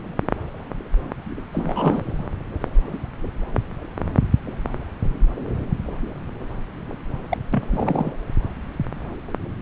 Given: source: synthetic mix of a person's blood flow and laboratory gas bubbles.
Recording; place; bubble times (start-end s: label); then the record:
Doppler ultrasound of blood flow; subclavian vein
1.53-2.02 s: bubbles
7.29-7.38 s: bubbles
7.50-7.63 s: bubbles
7.72-8.11 s: bubbles
From the record:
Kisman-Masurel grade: 222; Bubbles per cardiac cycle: several, 3 to 8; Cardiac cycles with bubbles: 10 to 50%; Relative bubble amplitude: moderate (0.250 to 0.450); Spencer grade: 2 (many but less than half of the cardiac periods contain bubble signals, singularly or in groups); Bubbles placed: anywhere in the cardiac cycle